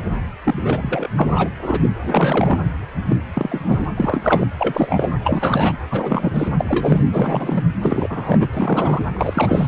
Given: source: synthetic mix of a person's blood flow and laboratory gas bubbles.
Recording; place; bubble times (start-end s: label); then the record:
Doppler ultrasound of blood flow; precordium
0.00-0.04 s: bubbles
0.44-1.08 s: bubbles
1.17-1.50 s: bubbles
1.60-1.89 s: bubbles
2.01-2.58 s: bubbles
3.08-3.17 s: bubbles
3.33-3.85 s: bubbles
3.96-4.47 s: bubbles
4.58-5.09 s: bubbles
5.24-5.72 s: bubbles
5.90-6.48 s: bubbles
6.59-7.01 s: bubbles
7.12-7.64 s: bubbles
7.81-8.47 s: bubbles
8.52-9.02 s: bubbles
9.14-9.68 s: bubbles
From the record:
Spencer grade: 3 (all of the cardiac periods contain showers or single bubble signals, but not dominating or overriding the cardiac motion signals); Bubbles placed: anywhere in the cardiac cycle